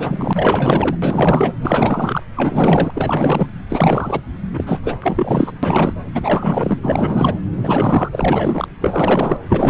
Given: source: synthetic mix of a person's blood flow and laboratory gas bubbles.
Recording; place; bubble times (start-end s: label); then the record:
Doppler ultrasound of blood flow; subclavian vein
0.00-0.97 s: bubbles
1.02-1.53 s: bubbles
1.62-2.23 s: bubbles
2.36-2.91 s: bubbles
2.96-3.48 s: bubbles
3.70-4.20 s: bubbles
4.53-4.79 s: bubbles
4.83-4.98 s: bubbles
5.02-5.52 s: bubbles
5.62-5.94 s: bubbles
6.12-6.78 s: bubbles
6.82-7.39 s: bubbles
7.54-8.09 s: bubbles
8.12-8.67 s: bubbles
8.81-9.38 s: bubbles
9.50-9.70 s: bubbles
From the record:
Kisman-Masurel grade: 444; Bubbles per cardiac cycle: continuous sound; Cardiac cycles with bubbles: 100%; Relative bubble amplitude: maximal (0.775 to 0.999); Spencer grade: 4 (maximum detectable bubble signal sounding continuously throughout systole and diastole of every cardiac period, and overriding the amplitude of the normal cardiac signals); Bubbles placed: anywhere in the cardiac cycle